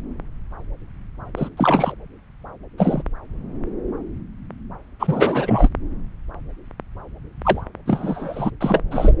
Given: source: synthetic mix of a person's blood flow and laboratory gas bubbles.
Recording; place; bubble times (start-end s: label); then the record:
Doppler ultrasound of blood flow; subclavian vein
1.36-1.49 s: bubbles
1.57-1.96 s: bubbles
2.77-3.02 s: bubbles
4.99-5.69 s: bubbles
7.44-7.61 s: bubbles
7.86-8.50 s: bubbles
8.60-8.83 s: bubbles
8.90-9.15 s: bubbles
From the record:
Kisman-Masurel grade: 233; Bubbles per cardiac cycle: several, 3 to 8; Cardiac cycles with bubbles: 50 to 99%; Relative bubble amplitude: loud (0.450 to 0.775); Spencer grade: 3 (all of the cardiac periods contain showers or single bubble signals, but not dominating or overriding the cardiac motion signals); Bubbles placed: anywhere in the cardiac cycle